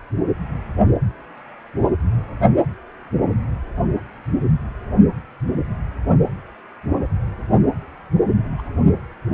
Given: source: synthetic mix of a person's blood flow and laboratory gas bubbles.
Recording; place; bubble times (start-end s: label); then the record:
Doppler ultrasound of blood flow; precordium
8.58-8.62 s: bubbles
From the record:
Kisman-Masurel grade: 111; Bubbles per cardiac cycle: 1 to 2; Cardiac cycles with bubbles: 1 to 10%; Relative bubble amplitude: barely perceptible (0.100 to 0.250); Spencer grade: 1 (occasional bubble signal discernible with the cardiac motion signal, with majority of cardiac periods free of bubbles); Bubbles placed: only in the low amplitude regions of the cardiac cycle